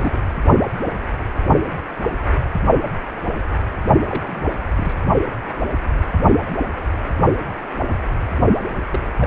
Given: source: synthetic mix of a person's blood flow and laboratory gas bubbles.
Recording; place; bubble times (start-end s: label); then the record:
Doppler ultrasound of blood flow; precordium
0.00-0.18 s: bubbles
4.08-4.53 s: bubbles
4.76-4.96 s: bubbles
8.92-9.17 s: bubbles
9.19-9.27 s: bubbles
From the record:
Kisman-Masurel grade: 221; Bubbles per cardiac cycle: several, 3 to 8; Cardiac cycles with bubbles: 10 to 50%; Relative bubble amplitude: barely perceptible (0.100 to 0.250); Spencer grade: 2 (many but less than half of the cardiac periods contain bubble signals, singularly or in groups); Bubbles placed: only in the low amplitude regions of the cardiac cycle